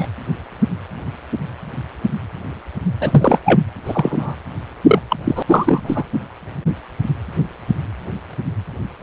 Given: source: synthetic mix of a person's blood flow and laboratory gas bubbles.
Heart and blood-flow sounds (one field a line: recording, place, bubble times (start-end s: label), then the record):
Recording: Doppler ultrasound of blood flow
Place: precordium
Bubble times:
0.00-0.07 s: bubbles
3.00-3.40 s: bubbles
3.46-3.61 s: bubbles
3.85-4.35 s: bubbles
4.86-4.99 s: bubbles
5.10-5.17 s: bubbles
5.24-5.42 s: bubbles
5.48-6.04 s: bubbles
From the record:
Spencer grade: 2 (many but less than half of the cardiac periods contain bubble signals, singularly or in groups)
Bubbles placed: anywhere in the cardiac cycle